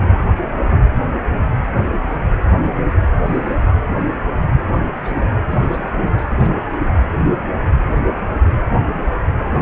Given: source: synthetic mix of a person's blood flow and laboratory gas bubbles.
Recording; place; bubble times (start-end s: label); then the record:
Doppler ultrasound of blood flow; precordium
3.25-3.76 s: bubbles
4.93-4.97 s: bubbles
5.03-5.30 s: bubbles
5.50-5.58 s: bubbles
5.62-5.91 s: bubbles
5.96-6.04 s: bubbles
6.08-6.25 s: bubbles
6.30-6.86 s: bubbles
9.38-9.44 s: bubbles
9.54-9.60 s: bubbles
From the record:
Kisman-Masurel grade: 221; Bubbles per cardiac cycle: several, 3 to 8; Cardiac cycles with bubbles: 10 to 50%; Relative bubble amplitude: barely perceptible (0.100 to 0.250); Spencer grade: 2 (many but less than half of the cardiac periods contain bubble signals, singularly or in groups); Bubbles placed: anywhere in the cardiac cycle